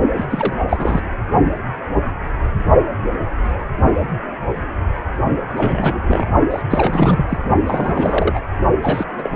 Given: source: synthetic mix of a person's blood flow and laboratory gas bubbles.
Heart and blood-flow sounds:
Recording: Doppler ultrasound of blood flow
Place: precordium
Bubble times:
0.16-0.25 s: bubbles
0.29-0.56 s: bubbles
0.69-1.00 s: bubbles
5.53-6.03 s: bubbles
6.07-6.25 s: bubbles
6.50-6.62 s: bubbles
6.70-7.38 s: bubbles
7.66-8.40 s: bubbles
8.82-9.05 s: bubbles
9.17-9.30 s: bubbles
From the record:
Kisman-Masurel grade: 332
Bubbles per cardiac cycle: rolling drumbeat, 9 or more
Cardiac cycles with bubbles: 50 to 99%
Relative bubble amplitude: moderate (0.250 to 0.450)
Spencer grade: 3 (all of the cardiac periods contain showers or single bubble signals, but not dominating or overriding the cardiac motion signals)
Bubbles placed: only in the low amplitude regions of the cardiac cycle

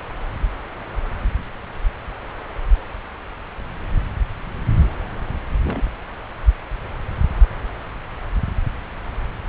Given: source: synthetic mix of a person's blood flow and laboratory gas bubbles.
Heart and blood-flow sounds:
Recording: Doppler ultrasound of blood flow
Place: subclavian vein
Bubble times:
5.62-5.82 s: bubbles
From the record:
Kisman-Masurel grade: 111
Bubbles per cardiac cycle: 1 to 2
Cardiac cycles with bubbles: 1 to 10%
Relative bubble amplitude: barely perceptible (0.100 to 0.250)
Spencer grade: 1 (occasional bubble signal discernible with the cardiac motion signal, with majority of cardiac periods free of bubbles)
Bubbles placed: anywhere in the cardiac cycle

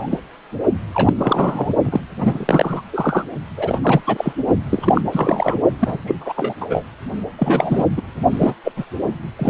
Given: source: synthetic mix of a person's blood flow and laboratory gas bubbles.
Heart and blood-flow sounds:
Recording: Doppler ultrasound of blood flow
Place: precordium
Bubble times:
0.00-0.18 s: bubbles
0.94-1.13 s: bubbles
1.19-1.74 s: bubbles
1.85-2.00 s: bubbles
2.18-2.83 s: bubbles
2.92-3.24 s: bubbles
3.57-3.79 s: bubbles
3.83-4.00 s: bubbles
4.07-4.33 s: bubbles
4.70-5.02 s: bubbles
5.12-5.60 s: bubbles
5.79-5.98 s: bubbles
6.06-6.15 s: bubbles
6.21-6.33 s: bubbles
6.36-6.54 s: bubbles
6.61-6.84 s: bubbles
7.38-7.86 s: bubbles
7.96-8.03 s: bubbles
8.31-8.54 s: bubbles
8.63-8.72 s: bubbles
8.77-8.85 s: bubbles
9.38-9.50 s: bubbles
From the record:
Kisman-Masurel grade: 332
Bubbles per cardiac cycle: rolling drumbeat, 9 or more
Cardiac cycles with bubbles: 50 to 99%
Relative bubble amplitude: moderate (0.250 to 0.450)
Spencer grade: 3 (all of the cardiac periods contain showers or single bubble signals, but not dominating or overriding the cardiac motion signals)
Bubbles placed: only in the low amplitude regions of the cardiac cycle

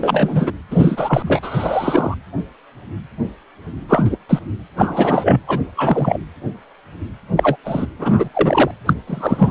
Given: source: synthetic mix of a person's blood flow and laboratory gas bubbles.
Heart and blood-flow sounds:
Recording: Doppler ultrasound of blood flow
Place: precordium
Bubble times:
0.00-0.52 s: bubbles
0.70-1.40 s: bubbles
1.43-2.15 s: bubbles
3.88-4.17 s: bubbles
4.29-4.39 s: bubbles
4.76-5.39 s: bubbles
5.47-5.59 s: bubbles
5.76-6.17 s: bubbles
7.37-7.56 s: bubbles
7.64-7.86 s: bubbles
7.99-8.29 s: bubbles
8.34-8.71 s: bubbles
8.86-8.94 s: bubbles
9.07-9.51 s: bubbles
From the record:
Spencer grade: 3 (all of the cardiac periods contain showers or single bubble signals, but not dominating or overriding the cardiac motion signals)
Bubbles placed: anywhere in the cardiac cycle

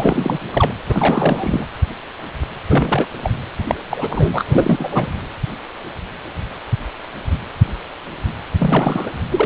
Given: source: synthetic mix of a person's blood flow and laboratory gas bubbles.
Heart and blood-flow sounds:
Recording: Doppler ultrasound of blood flow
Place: precordium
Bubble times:
0.00-0.40 s: bubbles
0.52-0.73 s: bubbles
0.87-1.67 s: bubbles
2.69-3.06 s: bubbles
3.24-3.31 s: bubbles
3.67-3.75 s: bubbles
3.89-4.42 s: bubbles
4.46-5.19 s: bubbles
8.59-9.14 s: bubbles
9.30-9.46 s: bubbles
From the record:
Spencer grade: 3 (all of the cardiac periods contain showers or single bubble signals, but not dominating or overriding the cardiac motion signals)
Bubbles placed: anywhere in the cardiac cycle

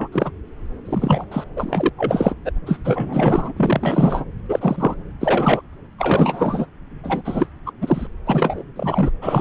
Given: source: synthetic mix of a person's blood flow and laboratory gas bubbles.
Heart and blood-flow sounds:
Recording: Doppler ultrasound of blood flow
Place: subclavian vein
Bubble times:
0.00-0.08 s: bubbles
0.12-0.32 s: bubbles
0.85-1.25 s: bubbles
1.31-1.44 s: bubbles
1.56-1.89 s: bubbles
1.97-2.35 s: bubbles
2.44-2.52 s: bubbles
2.65-2.78 s: bubbles
2.84-3.52 s: bubbles
3.56-4.24 s: bubbles
4.48-4.96 s: bubbles
5.20-5.62 s: bubbles
5.98-6.66 s: bubbles
7.03-7.21 s: bubbles
7.24-7.47 s: bubbles
7.65-7.72 s: bubbles
7.81-8.07 s: bubbles
8.26-8.63 s: bubbles
8.76-9.11 s: bubbles
9.21-9.41 s: bubbles
From the record:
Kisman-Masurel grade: 343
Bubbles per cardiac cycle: rolling drumbeat, 9 or more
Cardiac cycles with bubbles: 100%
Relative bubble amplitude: loud (0.450 to 0.775)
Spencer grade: 3 (all of the cardiac periods contain showers or single bubble signals, but not dominating or overriding the cardiac motion signals)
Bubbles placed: anywhere in the cardiac cycle

